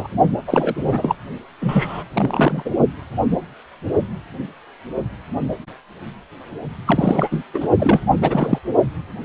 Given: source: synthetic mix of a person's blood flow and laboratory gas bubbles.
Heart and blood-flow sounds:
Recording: Doppler ultrasound of blood flow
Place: precordium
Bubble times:
0.00-0.08 s: bubbles
0.47-0.76 s: bubbles
0.83-1.16 s: bubbles
1.61-2.04 s: bubbles
2.13-2.70 s: bubbles
6.85-7.29 s: bubbles
7.31-7.42 s: bubbles
7.54-7.68 s: bubbles
7.79-8.03 s: bubbles
8.21-8.58 s: bubbles
From the record:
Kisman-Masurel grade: 333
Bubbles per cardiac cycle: rolling drumbeat, 9 or more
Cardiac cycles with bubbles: 50 to 99%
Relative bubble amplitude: loud (0.450 to 0.775)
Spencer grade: 3 (all of the cardiac periods contain showers or single bubble signals, but not dominating or overriding the cardiac motion signals)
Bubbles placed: only in the low amplitude regions of the cardiac cycle

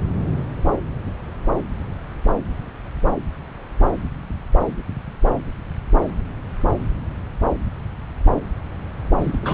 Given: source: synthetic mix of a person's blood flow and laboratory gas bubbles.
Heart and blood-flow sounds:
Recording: Doppler ultrasound of blood flow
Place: subclavian vein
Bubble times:
9.21-9.54 s: bubbles
From the record:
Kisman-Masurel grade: 211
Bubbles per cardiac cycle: several, 3 to 8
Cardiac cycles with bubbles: 1 to 10%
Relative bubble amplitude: barely perceptible (0.100 to 0.250)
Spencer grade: 1 (occasional bubble signal discernible with the cardiac motion signal, with majority of cardiac periods free of bubbles)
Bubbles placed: anywhere in the cardiac cycle

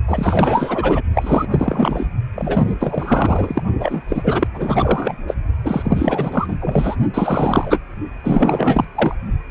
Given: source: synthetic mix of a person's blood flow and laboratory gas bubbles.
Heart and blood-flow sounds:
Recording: Doppler ultrasound of blood flow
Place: precordium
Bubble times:
0.07-1.02 s: bubbles
1.14-2.06 s: bubbles
2.35-2.75 s: bubbles
2.79-3.62 s: bubbles
3.79-4.04 s: bubbles
4.08-4.47 s: bubbles
4.54-5.17 s: bubbles
5.27-5.35 s: bubbles
5.63-6.56 s: bubbles
6.60-6.96 s: bubbles
7.13-7.79 s: bubbles
8.23-8.85 s: bubbles
8.95-9.15 s: bubbles
From the record:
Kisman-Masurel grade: 444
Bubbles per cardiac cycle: continuous sound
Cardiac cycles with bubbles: 100%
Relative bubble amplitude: maximal (0.775 to 0.999)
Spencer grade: 4 (maximum detectable bubble signal sounding continuously throughout systole and diastole of every cardiac period, and overriding the amplitude of the normal cardiac signals)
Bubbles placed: only in the low amplitude regions of the cardiac cycle

